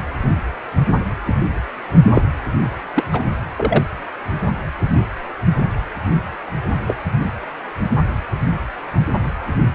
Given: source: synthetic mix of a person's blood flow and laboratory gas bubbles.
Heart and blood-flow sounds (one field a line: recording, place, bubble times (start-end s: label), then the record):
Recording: Doppler ultrasound of blood flow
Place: precordium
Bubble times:
2.12-2.22 s: bubbles
2.94-3.04 s: bubbles
3.12-3.21 s: bubbles
3.56-3.84 s: bubbles
6.87-6.96 s: bubbles
From the record:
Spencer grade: 2 (many but less than half of the cardiac periods contain bubble signals, singularly or in groups)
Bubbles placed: anywhere in the cardiac cycle